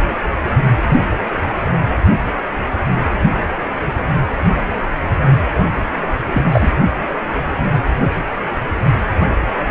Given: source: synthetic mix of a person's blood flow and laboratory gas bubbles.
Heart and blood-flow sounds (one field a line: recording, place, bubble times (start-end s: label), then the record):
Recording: Doppler ultrasound of blood flow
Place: precordium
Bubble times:
6.31-6.44 s: bubbles
6.51-6.71 s: bubbles
From the record:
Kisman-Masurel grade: 113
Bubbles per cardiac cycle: 1 to 2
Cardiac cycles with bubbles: 1 to 10%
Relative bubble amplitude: loud (0.450 to 0.775)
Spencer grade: 1 (occasional bubble signal discernible with the cardiac motion signal, with majority of cardiac periods free of bubbles)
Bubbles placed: only in the low amplitude regions of the cardiac cycle